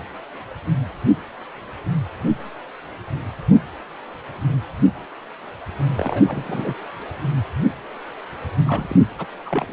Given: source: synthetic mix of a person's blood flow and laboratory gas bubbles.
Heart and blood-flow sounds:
Doppler ultrasound of blood flow; precordium
5.97-6.74 s: bubbles
8.66-8.96 s: bubbles
9.18-9.26 s: bubbles
9.46-9.73 s: bubbles
From the record:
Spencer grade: 2 (many but less than half of the cardiac periods contain bubble signals, singularly or in groups); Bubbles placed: anywhere in the cardiac cycle

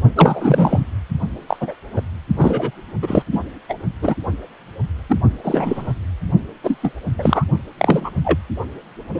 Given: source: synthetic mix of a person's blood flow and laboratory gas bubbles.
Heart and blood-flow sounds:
Doppler ultrasound of blood flow; precordium
0.15-0.79 s: bubbles
1.48-1.56 s: bubbles
1.60-1.75 s: bubbles
1.96-2.01 s: bubbles
2.37-2.71 s: bubbles
3.02-3.23 s: bubbles
3.32-3.40 s: bubbles
3.69-3.74 s: bubbles
4.01-4.15 s: bubbles
5.09-5.17 s: bubbles
5.43-5.95 s: bubbles
6.63-6.78 s: bubbles
6.82-6.92 s: bubbles
7.17-7.45 s: bubbles
7.78-8.10 s: bubbles
8.24-8.39 s: bubbles
9.13-9.20 s: bubbles
From the record:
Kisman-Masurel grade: 243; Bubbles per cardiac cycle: several, 3 to 8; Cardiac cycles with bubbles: 100%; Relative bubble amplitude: loud (0.450 to 0.775); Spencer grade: 3 (all of the cardiac periods contain showers or single bubble signals, but not dominating or overriding the cardiac motion signals); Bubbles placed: only in the low amplitude regions of the cardiac cycle

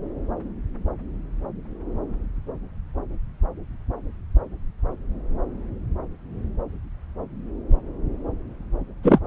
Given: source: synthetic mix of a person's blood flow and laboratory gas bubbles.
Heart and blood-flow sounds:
Doppler ultrasound of blood flow; subclavian vein
9.03-9.20 s: bubbles
From the record:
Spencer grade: 1 (occasional bubble signal discernible with the cardiac motion signal, with majority of cardiac periods free of bubbles); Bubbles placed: anywhere in the cardiac cycle

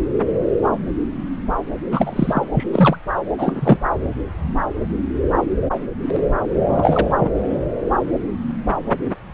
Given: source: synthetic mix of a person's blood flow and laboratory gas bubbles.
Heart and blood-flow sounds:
Doppler ultrasound of blood flow; subclavian vein
1.91-2.49 s: bubbles
2.54-2.67 s: bubbles
2.72-2.96 s: bubbles
3.38-3.78 s: bubbles
6.68-7.07 s: bubbles
7.16-7.30 s: bubbles
From the record:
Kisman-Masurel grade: 223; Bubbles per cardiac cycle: several, 3 to 8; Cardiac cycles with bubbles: 10 to 50%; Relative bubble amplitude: loud (0.450 to 0.775); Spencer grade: 2 (many but less than half of the cardiac periods contain bubble signals, singularly or in groups); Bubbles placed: anywhere in the cardiac cycle

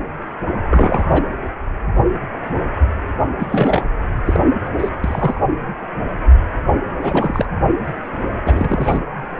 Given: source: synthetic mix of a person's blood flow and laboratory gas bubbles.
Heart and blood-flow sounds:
Doppler ultrasound of blood flow; precordium
0.70-1.23 s: bubbles
3.39-3.88 s: bubbles
4.25-4.40 s: bubbles
4.79-4.89 s: bubbles
5.04-5.41 s: bubbles
7.01-7.45 s: bubbles
8.46-8.98 s: bubbles
From the record:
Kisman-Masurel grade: 222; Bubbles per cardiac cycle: several, 3 to 8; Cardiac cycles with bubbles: 10 to 50%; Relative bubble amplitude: moderate (0.250 to 0.450); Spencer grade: 2 (many but less than half of the cardiac periods contain bubble signals, singularly or in groups); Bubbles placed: anywhere in the cardiac cycle

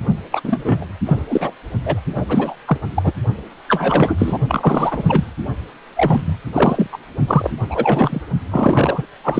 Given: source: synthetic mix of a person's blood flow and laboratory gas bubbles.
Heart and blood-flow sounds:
Doppler ultrasound of blood flow; precordium
0.32-0.41 s: bubbles
0.43-0.86 s: bubbles
1.06-1.25 s: bubbles
1.29-1.52 s: bubbles
1.84-2.01 s: bubbles
2.16-2.25 s: bubbles
2.29-2.55 s: bubbles
2.67-2.78 s: bubbles
2.95-3.13 s: bubbles
3.68-4.38 s: bubbles
4.48-5.25 s: bubbles
5.96-6.36 s: bubbles
6.53-6.87 s: bubbles
6.92-6.98 s: bubbles
7.27-7.50 s: bubbles
7.69-8.21 s: bubbles
8.51-9.06 s: bubbles
9.23-9.40 s: bubbles
From the record:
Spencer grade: 3 (all of the cardiac periods contain showers or single bubble signals, but not dominating or overriding the cardiac motion signals); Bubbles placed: only in the low amplitude regions of the cardiac cycle

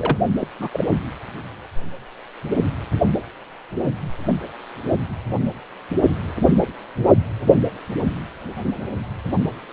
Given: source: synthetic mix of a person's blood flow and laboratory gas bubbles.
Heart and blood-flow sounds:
Doppler ultrasound of blood flow; precordium
0.00-0.17 s: bubbles
0.39-0.47 s: bubbles
0.59-0.69 s: bubbles
0.73-0.85 s: bubbles
From the record:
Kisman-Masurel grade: 212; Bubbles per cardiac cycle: several, 3 to 8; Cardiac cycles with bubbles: 1 to 10%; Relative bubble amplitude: moderate (0.250 to 0.450); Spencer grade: 1 (occasional bubble signal discernible with the cardiac motion signal, with majority of cardiac periods free of bubbles); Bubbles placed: only in the low amplitude regions of the cardiac cycle

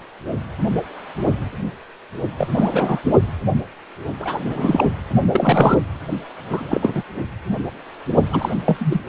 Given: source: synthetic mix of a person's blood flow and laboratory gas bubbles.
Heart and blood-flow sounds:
Doppler ultrasound of blood flow; precordium
2.38-2.48 s: bubbles
2.54-3.00 s: bubbles
4.20-4.40 s: bubbles
4.46-4.85 s: bubbles
5.32-5.82 s: bubbles
6.50-6.92 s: bubbles
6.95-7.03 s: bubbles
8.31-8.54 s: bubbles
8.65-9.01 s: bubbles
From the record:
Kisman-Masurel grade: 233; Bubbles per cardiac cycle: several, 3 to 8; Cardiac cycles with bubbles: 50 to 99%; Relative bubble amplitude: loud (0.450 to 0.775); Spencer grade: 3 (all of the cardiac periods contain showers or single bubble signals, but not dominating or overriding the cardiac motion signals); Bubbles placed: only in the low amplitude regions of the cardiac cycle

